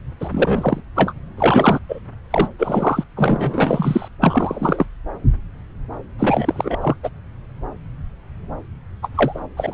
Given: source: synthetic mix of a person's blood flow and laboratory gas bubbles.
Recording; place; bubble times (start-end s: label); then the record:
Doppler ultrasound of blood flow; subclavian vein
0.20-0.80 s: bubbles
0.96-1.12 s: bubbles
1.37-1.79 s: bubbles
1.89-2.00 s: bubbles
2.31-2.48 s: bubbles
2.58-3.04 s: bubbles
3.15-4.08 s: bubbles
4.20-4.86 s: bubbles
6.18-6.96 s: bubbles
7.03-7.09 s: bubbles
9.03-9.08 s: bubbles
9.14-9.40 s: bubbles
9.56-9.74 s: bubbles
From the record:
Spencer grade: 3 (all of the cardiac periods contain showers or single bubble signals, but not dominating or overriding the cardiac motion signals); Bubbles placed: anywhere in the cardiac cycle